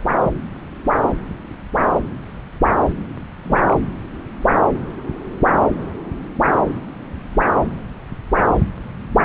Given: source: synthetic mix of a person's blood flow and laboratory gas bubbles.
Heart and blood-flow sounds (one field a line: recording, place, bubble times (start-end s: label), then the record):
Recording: Doppler ultrasound of blood flow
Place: subclavian vein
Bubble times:
3.43-3.76 s: bubbles
From the record:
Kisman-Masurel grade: 112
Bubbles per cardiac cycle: 1 to 2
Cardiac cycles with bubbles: 1 to 10%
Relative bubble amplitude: moderate (0.250 to 0.450)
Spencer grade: 1 (occasional bubble signal discernible with the cardiac motion signal, with majority of cardiac periods free of bubbles)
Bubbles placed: anywhere in the cardiac cycle